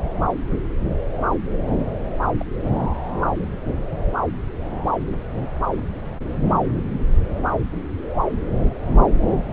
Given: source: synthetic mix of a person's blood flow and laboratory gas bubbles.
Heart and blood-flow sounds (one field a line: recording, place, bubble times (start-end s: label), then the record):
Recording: Doppler ultrasound of blood flow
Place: subclavian vein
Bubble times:
2.36-2.45 s: bubbles
From the record:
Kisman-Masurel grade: 121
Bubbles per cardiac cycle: 1 to 2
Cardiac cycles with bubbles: 10 to 50%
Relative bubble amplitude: barely perceptible (0.100 to 0.250)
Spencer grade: 2 (many but less than half of the cardiac periods contain bubble signals, singularly or in groups)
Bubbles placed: anywhere in the cardiac cycle